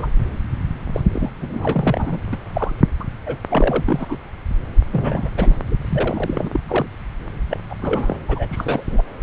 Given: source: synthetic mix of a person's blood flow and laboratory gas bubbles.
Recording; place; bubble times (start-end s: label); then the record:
Doppler ultrasound of blood flow; subclavian vein
0.00-0.12 s: bubbles
0.93-1.01 s: bubbles
1.14-1.29 s: bubbles
1.41-2.19 s: bubbles
2.33-2.37 s: bubbles
2.55-2.71 s: bubbles
3.00-3.05 s: bubbles
3.26-3.37 s: bubbles
3.49-4.18 s: bubbles
4.92-5.29 s: bubbles
5.36-5.55 s: bubbles
5.68-6.60 s: bubbles
6.67-6.86 s: bubbles
7.50-7.59 s: bubbles
7.70-7.75 s: bubbles
7.82-8.17 s: bubbles
8.28-8.46 s: bubbles
8.50-8.83 s: bubbles
8.90-9.02 s: bubbles
From the record:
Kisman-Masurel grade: 232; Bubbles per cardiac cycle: several, 3 to 8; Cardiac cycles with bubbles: 50 to 99%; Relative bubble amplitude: moderate (0.250 to 0.450); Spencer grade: 3 (all of the cardiac periods contain showers or single bubble signals, but not dominating or overriding the cardiac motion signals); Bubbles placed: anywhere in the cardiac cycle